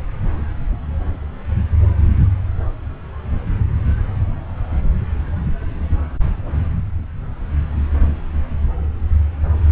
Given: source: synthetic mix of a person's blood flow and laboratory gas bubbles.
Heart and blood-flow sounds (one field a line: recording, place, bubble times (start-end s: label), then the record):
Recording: Doppler ultrasound of blood flow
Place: subclavian vein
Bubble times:
no bubbles
From the record:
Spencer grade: 0 (complete lack of bubble signals)